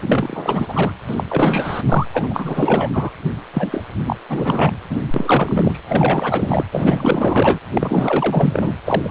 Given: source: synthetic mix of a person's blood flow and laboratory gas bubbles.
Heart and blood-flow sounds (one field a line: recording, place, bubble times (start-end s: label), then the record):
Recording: Doppler ultrasound of blood flow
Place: precordium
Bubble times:
0.02-0.92 s: bubbles
1.07-1.24 s: bubbles
1.30-2.06 s: bubbles
2.13-3.10 s: bubbles
3.53-3.85 s: bubbles
4.06-4.17 s: bubbles
4.28-4.71 s: bubbles
4.89-4.97 s: bubbles
5.14-5.80 s: bubbles
5.88-6.66 s: bubbles
6.71-7.60 s: bubbles
7.73-8.73 s: bubbles
8.85-9.11 s: bubbles
From the record:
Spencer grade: 4 (maximum detectable bubble signal sounding continuously throughout systole and diastole of every cardiac period, and overriding the amplitude of the normal cardiac signals)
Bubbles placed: anywhere in the cardiac cycle